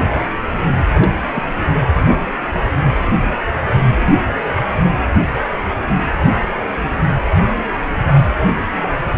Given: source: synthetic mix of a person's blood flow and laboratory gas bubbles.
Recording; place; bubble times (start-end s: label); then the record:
Doppler ultrasound of blood flow; precordium
0.91-1.23 s: bubbles
1.26-1.29 s: bubbles
1.32-1.44 s: bubbles
From the record:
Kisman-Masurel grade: 111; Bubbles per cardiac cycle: 1 to 2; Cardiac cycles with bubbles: 1 to 10%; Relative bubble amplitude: barely perceptible (0.100 to 0.250); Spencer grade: 1 (occasional bubble signal discernible with the cardiac motion signal, with majority of cardiac periods free of bubbles); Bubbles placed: anywhere in the cardiac cycle